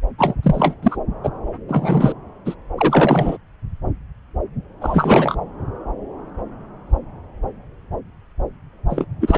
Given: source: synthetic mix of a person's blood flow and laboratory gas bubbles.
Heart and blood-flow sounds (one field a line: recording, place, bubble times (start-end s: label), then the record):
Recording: Doppler ultrasound of blood flow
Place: subclavian vein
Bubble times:
0.18-0.35 s: bubbles
0.43-0.74 s: bubbles
0.83-0.96 s: bubbles
1.23-1.29 s: bubbles
1.68-2.13 s: bubbles
2.46-2.54 s: bubbles
2.77-3.37 s: bubbles
4.80-5.36 s: bubbles
8.89-9.05 s: bubbles
9.20-9.38 s: bubbles
From the record:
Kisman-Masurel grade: 233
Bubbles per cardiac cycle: several, 3 to 8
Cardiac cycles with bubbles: 50 to 99%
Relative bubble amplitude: loud (0.450 to 0.775)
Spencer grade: 3 (all of the cardiac periods contain showers or single bubble signals, but not dominating or overriding the cardiac motion signals)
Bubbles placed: anywhere in the cardiac cycle